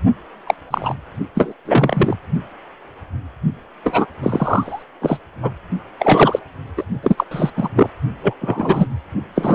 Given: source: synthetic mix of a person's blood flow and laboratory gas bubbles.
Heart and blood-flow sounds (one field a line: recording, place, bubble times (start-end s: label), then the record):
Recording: Doppler ultrasound of blood flow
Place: precordium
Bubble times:
0.47-0.55 s: bubbles
0.71-0.95 s: bubbles
1.34-1.53 s: bubbles
1.65-2.17 s: bubbles
3.83-4.07 s: bubbles
4.23-4.83 s: bubbles
5.02-5.20 s: bubbles
5.42-5.51 s: bubbles
5.99-6.39 s: bubbles
6.77-6.83 s: bubbles
7.03-7.24 s: bubbles
7.31-7.50 s: bubbles
7.57-7.69 s: bubbles
7.75-7.90 s: bubbles
8.22-8.34 s: bubbles
8.40-8.87 s: bubbles
9.35-9.54 s: bubbles
From the record:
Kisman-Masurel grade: 233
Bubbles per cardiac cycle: several, 3 to 8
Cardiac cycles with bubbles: 50 to 99%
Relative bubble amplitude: loud (0.450 to 0.775)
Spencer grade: 3 (all of the cardiac periods contain showers or single bubble signals, but not dominating or overriding the cardiac motion signals)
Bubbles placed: only in the low amplitude regions of the cardiac cycle